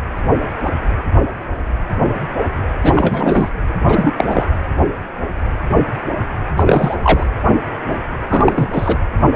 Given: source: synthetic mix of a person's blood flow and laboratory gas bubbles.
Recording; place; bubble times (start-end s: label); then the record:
Doppler ultrasound of blood flow; precordium
2.83-3.50 s: bubbles
3.88-4.12 s: bubbles
4.17-4.45 s: bubbles
6.57-6.96 s: bubbles
7.02-7.26 s: bubbles
8.29-8.98 s: bubbles
From the record:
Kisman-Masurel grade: 223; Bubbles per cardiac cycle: several, 3 to 8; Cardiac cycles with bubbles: 10 to 50%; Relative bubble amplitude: loud (0.450 to 0.775); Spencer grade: 2 (many but less than half of the cardiac periods contain bubble signals, singularly or in groups); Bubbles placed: anywhere in the cardiac cycle